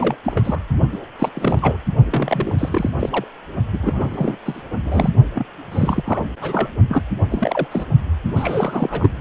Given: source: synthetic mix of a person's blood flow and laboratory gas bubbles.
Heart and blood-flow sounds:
Doppler ultrasound of blood flow; precordium
0.00-0.15 s: bubbles
0.25-0.60 s: bubbles
0.92-0.98 s: bubbles
1.19-1.29 s: bubbles
1.33-1.77 s: bubbles
2.04-2.55 s: bubbles
2.58-2.90 s: bubbles
3.00-3.25 s: bubbles
3.72-3.79 s: bubbles
3.82-4.38 s: bubbles
4.46-4.62 s: bubbles
4.84-5.10 s: bubbles
5.34-5.46 s: bubbles
5.71-6.24 s: bubbles
6.41-6.68 s: bubbles
6.89-7.03 s: bubbles
7.30-7.67 s: bubbles
7.71-7.86 s: bubbles
8.36-9.12 s: bubbles
From the record:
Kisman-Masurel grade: 342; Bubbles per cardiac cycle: rolling drumbeat, 9 or more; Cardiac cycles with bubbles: 100%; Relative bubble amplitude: moderate (0.250 to 0.450); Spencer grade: 3 (all of the cardiac periods contain showers or single bubble signals, but not dominating or overriding the cardiac motion signals); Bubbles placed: only in the low amplitude regions of the cardiac cycle

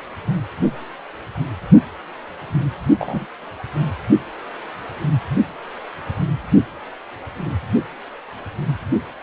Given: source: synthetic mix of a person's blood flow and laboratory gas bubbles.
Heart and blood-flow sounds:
Doppler ultrasound of blood flow; precordium
2.98-3.26 s: bubbles
From the record:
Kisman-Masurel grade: 122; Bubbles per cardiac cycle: 1 to 2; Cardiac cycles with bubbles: 10 to 50%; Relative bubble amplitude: moderate (0.250 to 0.450); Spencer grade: 2 (many but less than half of the cardiac periods contain bubble signals, singularly or in groups); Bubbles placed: only in the low amplitude regions of the cardiac cycle

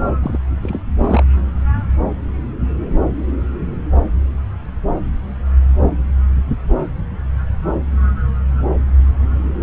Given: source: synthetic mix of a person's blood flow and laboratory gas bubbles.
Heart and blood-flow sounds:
Doppler ultrasound of blood flow; subclavian vein
0.23-0.39 s: bubbles
0.62-0.80 s: bubbles
0.98-1.23 s: bubbles
From the record:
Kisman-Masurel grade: 212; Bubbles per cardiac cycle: several, 3 to 8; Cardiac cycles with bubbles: 1 to 10%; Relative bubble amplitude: moderate (0.250 to 0.450); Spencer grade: 1 (occasional bubble signal discernible with the cardiac motion signal, with majority of cardiac periods free of bubbles); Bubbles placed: anywhere in the cardiac cycle

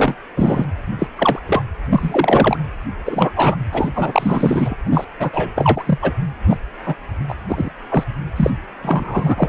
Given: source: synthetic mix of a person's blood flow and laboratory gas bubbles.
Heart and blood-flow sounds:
Doppler ultrasound of blood flow; precordium
0.00-0.15 s: bubbles
0.35-0.66 s: bubbles
0.98-1.07 s: bubbles
1.16-1.39 s: bubbles
1.46-1.62 s: bubbles
1.89-2.58 s: bubbles
3.05-3.31 s: bubbles
3.36-3.57 s: bubbles
3.72-3.91 s: bubbles
3.94-4.75 s: bubbles
4.84-5.04 s: bubbles
5.19-5.29 s: bubbles
5.33-5.51 s: bubbles
5.55-5.98 s: bubbles
6.02-6.12 s: bubbles
6.49-6.56 s: bubbles
6.85-6.94 s: bubbles
7.28-7.34 s: bubbles
7.48-7.70 s: bubbles
7.90-8.04 s: bubbles
8.36-8.50 s: bubbles
8.82-9.49 s: bubbles
From the record:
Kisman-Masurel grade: 243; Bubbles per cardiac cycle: several, 3 to 8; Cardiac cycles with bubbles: 100%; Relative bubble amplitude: loud (0.450 to 0.775); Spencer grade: 3 (all of the cardiac periods contain showers or single bubble signals, but not dominating or overriding the cardiac motion signals); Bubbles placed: anywhere in the cardiac cycle

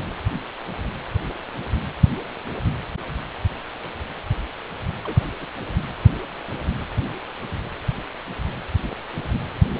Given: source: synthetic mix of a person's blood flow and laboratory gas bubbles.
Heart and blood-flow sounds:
Doppler ultrasound of blood flow; precordium
5.04-5.29 s: bubbles
5.41-5.46 s: bubbles
9.74-9.80 s: bubbles
From the record:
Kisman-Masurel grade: 121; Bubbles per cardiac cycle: 1 to 2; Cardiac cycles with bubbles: 10 to 50%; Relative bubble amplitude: barely perceptible (0.100 to 0.250); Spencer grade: 2 (many but less than half of the cardiac periods contain bubble signals, singularly or in groups); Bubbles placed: anywhere in the cardiac cycle

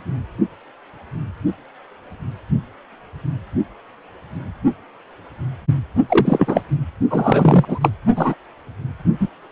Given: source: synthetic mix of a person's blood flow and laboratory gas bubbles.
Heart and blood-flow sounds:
Doppler ultrasound of blood flow; precordium
6.08-6.61 s: bubbles
7.10-7.65 s: bubbles
7.68-7.89 s: bubbles
8.16-8.35 s: bubbles
9.20-9.29 s: bubbles
From the record:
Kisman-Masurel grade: 223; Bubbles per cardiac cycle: several, 3 to 8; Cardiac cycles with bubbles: 10 to 50%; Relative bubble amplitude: loud (0.450 to 0.775); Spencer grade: 2 (many but less than half of the cardiac periods contain bubble signals, singularly or in groups); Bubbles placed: only in the low amplitude regions of the cardiac cycle

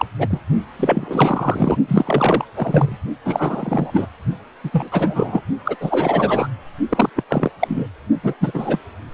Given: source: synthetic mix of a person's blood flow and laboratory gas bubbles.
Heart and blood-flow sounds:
Doppler ultrasound of blood flow; precordium
0.00-0.05 s: bubbles
0.18-0.27 s: bubbles
0.30-0.40 s: bubbles
0.79-1.78 s: bubbles
1.88-2.45 s: bubbles
2.55-2.97 s: bubbles
3.25-4.06 s: bubbles
4.64-4.90 s: bubbles
4.92-5.42 s: bubbles
5.65-5.75 s: bubbles
5.80-6.48 s: bubbles
6.89-7.10 s: bubbles
7.16-7.24 s: bubbles
7.29-7.51 s: bubbles
7.59-7.87 s: bubbles
8.23-8.35 s: bubbles
8.41-8.79 s: bubbles
From the record:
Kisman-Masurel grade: 342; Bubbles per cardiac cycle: rolling drumbeat, 9 or more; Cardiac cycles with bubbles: 100%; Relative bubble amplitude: moderate (0.250 to 0.450); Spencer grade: 3 (all of the cardiac periods contain showers or single bubble signals, but not dominating or overriding the cardiac motion signals); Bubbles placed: only in the low amplitude regions of the cardiac cycle

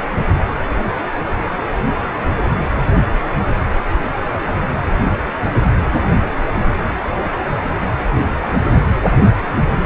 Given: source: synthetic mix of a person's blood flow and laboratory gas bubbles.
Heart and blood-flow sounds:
Doppler ultrasound of blood flow; precordium
no bubbles
From the record:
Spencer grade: 0 (complete lack of bubble signals)

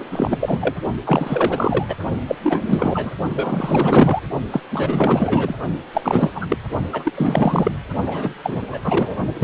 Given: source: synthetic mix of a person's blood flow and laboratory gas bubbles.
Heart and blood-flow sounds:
Doppler ultrasound of blood flow; precordium
0.00-0.05 s: bubbles
0.10-0.75 s: bubbles
1.04-1.95 s: bubbles
2.26-2.36 s: bubbles
2.43-3.12 s: bubbles
3.33-4.21 s: bubbles
4.50-4.60 s: bubbles
4.71-5.55 s: bubbles
5.93-6.30 s: bubbles
6.34-6.58 s: bubbles
6.92-7.12 s: bubbles
7.14-7.71 s: bubbles
8.05-8.34 s: bubbles
8.43-8.61 s: bubbles
8.71-8.80 s: bubbles
8.84-9.17 s: bubbles
9.33-9.44 s: bubbles
From the record:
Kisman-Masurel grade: 444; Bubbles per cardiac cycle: continuous sound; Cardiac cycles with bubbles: 100%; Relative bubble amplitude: maximal (0.775 to 0.999); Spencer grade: 4 (maximum detectable bubble signal sounding continuously throughout systole and diastole of every cardiac period, and overriding the amplitude of the normal cardiac signals); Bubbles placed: only in the low amplitude regions of the cardiac cycle

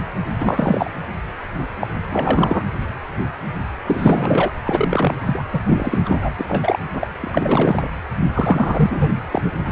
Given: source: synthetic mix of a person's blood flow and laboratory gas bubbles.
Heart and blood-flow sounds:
Doppler ultrasound of blood flow; precordium
0.38-0.91 s: bubbles
1.80-1.88 s: bubbles
2.09-2.63 s: bubbles
3.86-4.51 s: bubbles
4.65-5.15 s: bubbles
5.26-5.44 s: bubbles
5.53-5.62 s: bubbles
5.66-6.00 s: bubbles
6.05-6.30 s: bubbles
6.38-6.79 s: bubbles
6.92-7.07 s: bubbles
7.21-7.88 s: bubbles
8.34-9.11 s: bubbles
9.31-9.52 s: bubbles
9.65-9.72 s: bubbles
From the record:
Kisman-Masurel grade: 333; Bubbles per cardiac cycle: rolling drumbeat, 9 or more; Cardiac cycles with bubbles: 50 to 99%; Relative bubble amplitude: loud (0.450 to 0.775); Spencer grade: 3 (all of the cardiac periods contain showers or single bubble signals, but not dominating or overriding the cardiac motion signals); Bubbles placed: anywhere in the cardiac cycle

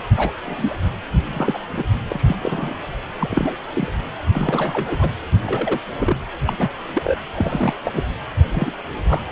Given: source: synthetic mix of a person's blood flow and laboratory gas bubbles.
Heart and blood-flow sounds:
Doppler ultrasound of blood flow; precordium
0.00-0.03 s: bubbles
0.16-0.31 s: bubbles
0.46-0.76 s: bubbles
1.33-1.58 s: bubbles
1.73-1.83 s: bubbles
2.08-2.24 s: bubbles
2.27-2.36 s: bubbles
2.42-2.75 s: bubbles
3.19-3.56 s: bubbles
3.74-3.92 s: bubbles
4.33-5.08 s: bubbles
5.42-5.80 s: bubbles
5.98-6.17 s: bubbles
6.46-6.53 s: bubbles
6.58-6.69 s: bubbles
6.93-7.18 s: bubbles
7.34-7.74 s: bubbles
7.83-8.04 s: bubbles
8.52-8.72 s: bubbles
9.08-9.22 s: bubbles
From the record:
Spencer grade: 3 (all of the cardiac periods contain showers or single bubble signals, but not dominating or overriding the cardiac motion signals); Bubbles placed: anywhere in the cardiac cycle

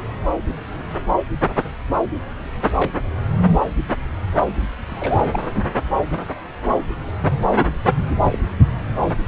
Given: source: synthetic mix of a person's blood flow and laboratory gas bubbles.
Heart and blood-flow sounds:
Doppler ultrasound of blood flow; subclavian vein
2.76-2.90 s: bubbles
4.88-5.21 s: bubbles
5.31-5.42 s: bubbles
5.46-5.60 s: bubbles
7.20-7.48 s: bubbles
7.60-7.66 s: bubbles
8.27-8.38 s: bubbles
From the record:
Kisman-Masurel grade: 121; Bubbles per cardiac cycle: 1 to 2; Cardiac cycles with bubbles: 10 to 50%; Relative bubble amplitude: barely perceptible (0.100 to 0.250); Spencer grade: 2 (many but less than half of the cardiac periods contain bubble signals, singularly or in groups); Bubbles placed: anywhere in the cardiac cycle

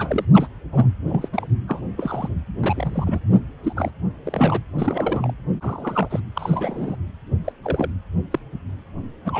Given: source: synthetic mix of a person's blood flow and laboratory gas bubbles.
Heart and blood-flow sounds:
Doppler ultrasound of blood flow; precordium
0.00-0.25 s: bubbles
0.34-0.48 s: bubbles
0.72-0.89 s: bubbles
1.08-1.29 s: bubbles
1.32-1.47 s: bubbles
1.68-1.81 s: bubbles
1.97-2.28 s: bubbles
2.62-3.19 s: bubbles
3.32-3.40 s: bubbles
3.63-3.73 s: bubbles
3.76-3.91 s: bubbles
4.25-4.60 s: bubbles
4.78-5.33 s: bubbles
5.61-6.20 s: bubbles
6.35-6.96 s: bubbles
7.45-7.53 s: bubbles
7.64-7.91 s: bubbles
8.31-8.39 s: bubbles
9.25-9.39 s: bubbles
From the record:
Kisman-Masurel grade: 242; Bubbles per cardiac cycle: several, 3 to 8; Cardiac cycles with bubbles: 100%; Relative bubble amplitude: moderate (0.250 to 0.450); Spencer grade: 3 (all of the cardiac periods contain showers or single bubble signals, but not dominating or overriding the cardiac motion signals); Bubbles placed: anywhere in the cardiac cycle

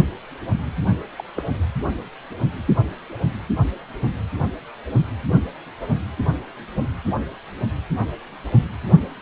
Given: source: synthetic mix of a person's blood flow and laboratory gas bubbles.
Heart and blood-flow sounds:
Doppler ultrasound of blood flow; precordium
1.18-1.23 s: bubbles
1.36-1.43 s: bubbles
From the record:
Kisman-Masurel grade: 111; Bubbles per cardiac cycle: 1 to 2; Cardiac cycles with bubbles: 1 to 10%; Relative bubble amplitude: barely perceptible (0.100 to 0.250); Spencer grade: 1 (occasional bubble signal discernible with the cardiac motion signal, with majority of cardiac periods free of bubbles); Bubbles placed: anywhere in the cardiac cycle

